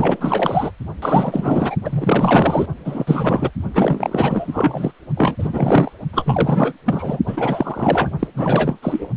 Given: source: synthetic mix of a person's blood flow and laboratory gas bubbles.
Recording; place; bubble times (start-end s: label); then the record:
Doppler ultrasound of blood flow; precordium
0.00-0.71 s: bubbles
1.01-1.76 s: bubbles
1.85-2.66 s: bubbles
2.85-3.50 s: bubbles
3.75-4.92 s: bubbles
5.17-5.36 s: bubbles
5.38-5.93 s: bubbles
6.12-6.74 s: bubbles
6.85-7.20 s: bubbles
7.27-8.12 s: bubbles
8.19-8.28 s: bubbles
8.35-8.78 s: bubbles
8.82-9.08 s: bubbles
From the record:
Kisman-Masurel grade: 444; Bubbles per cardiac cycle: continuous sound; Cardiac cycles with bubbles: 100%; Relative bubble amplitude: maximal (0.775 to 0.999); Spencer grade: 4 (maximum detectable bubble signal sounding continuously throughout systole and diastole of every cardiac period, and overriding the amplitude of the normal cardiac signals); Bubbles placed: only in the low amplitude regions of the cardiac cycle